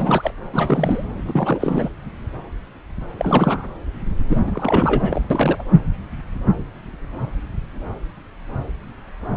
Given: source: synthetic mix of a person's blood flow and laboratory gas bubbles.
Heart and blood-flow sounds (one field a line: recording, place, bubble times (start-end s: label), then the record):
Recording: Doppler ultrasound of blood flow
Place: subclavian vein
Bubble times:
0.00-0.32 s: bubbles
0.52-1.06 s: bubbles
1.17-1.89 s: bubbles
3.17-3.67 s: bubbles
4.29-4.41 s: bubbles
4.46-5.21 s: bubbles
5.30-5.64 s: bubbles
From the record:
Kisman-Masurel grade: 332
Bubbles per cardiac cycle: rolling drumbeat, 9 or more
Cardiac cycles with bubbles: 50 to 99%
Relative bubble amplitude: moderate (0.250 to 0.450)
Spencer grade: 3 (all of the cardiac periods contain showers or single bubble signals, but not dominating or overriding the cardiac motion signals)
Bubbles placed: anywhere in the cardiac cycle